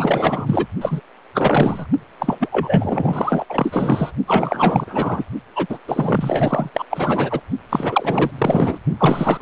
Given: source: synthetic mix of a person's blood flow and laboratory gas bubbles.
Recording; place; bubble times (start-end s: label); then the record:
Doppler ultrasound of blood flow; precordium
0.00-0.66 s: bubbles
0.81-1.00 s: bubbles
1.34-1.87 s: bubbles
2.20-3.45 s: bubbles
3.49-4.11 s: bubbles
4.27-5.25 s: bubbles
5.55-5.79 s: bubbles
5.88-6.69 s: bubbles
6.73-6.84 s: bubbles
6.90-7.40 s: bubbles
7.69-8.31 s: bubbles
8.38-8.79 s: bubbles
8.99-9.42 s: bubbles
From the record:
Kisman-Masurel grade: 444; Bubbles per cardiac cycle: continuous sound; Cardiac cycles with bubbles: 100%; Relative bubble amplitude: maximal (0.775 to 0.999); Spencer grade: 4 (maximum detectable bubble signal sounding continuously throughout systole and diastole of every cardiac period, and overriding the amplitude of the normal cardiac signals); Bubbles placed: only in the low amplitude regions of the cardiac cycle